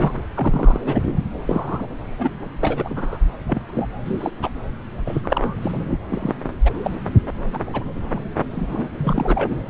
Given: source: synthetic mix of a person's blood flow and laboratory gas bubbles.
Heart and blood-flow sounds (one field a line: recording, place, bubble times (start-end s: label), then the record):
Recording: Doppler ultrasound of blood flow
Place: subclavian vein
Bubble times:
0.00-0.13 s: bubbles
0.16-0.23 s: bubbles
0.34-0.80 s: bubbles
0.85-1.22 s: bubbles
1.47-1.86 s: bubbles
2.07-2.31 s: bubbles
2.60-3.19 s: bubbles
3.47-3.64 s: bubbles
3.73-3.88 s: bubbles
4.06-4.31 s: bubbles
4.42-4.50 s: bubbles
5.05-5.21 s: bubbles
5.24-5.55 s: bubbles
5.62-5.72 s: bubbles
5.89-6.00 s: bubbles
6.09-6.35 s: bubbles
6.65-6.76 s: bubbles
6.83-6.96 s: bubbles
7.54-7.60 s: bubbles
7.73-7.85 s: bubbles
8.09-8.24 s: bubbles
8.52-8.88 s: bubbles
9.00-9.68 s: bubbles
From the record:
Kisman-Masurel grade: 242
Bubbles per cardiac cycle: several, 3 to 8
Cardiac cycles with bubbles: 100%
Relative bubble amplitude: moderate (0.250 to 0.450)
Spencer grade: 3 (all of the cardiac periods contain showers or single bubble signals, but not dominating or overriding the cardiac motion signals)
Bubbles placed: anywhere in the cardiac cycle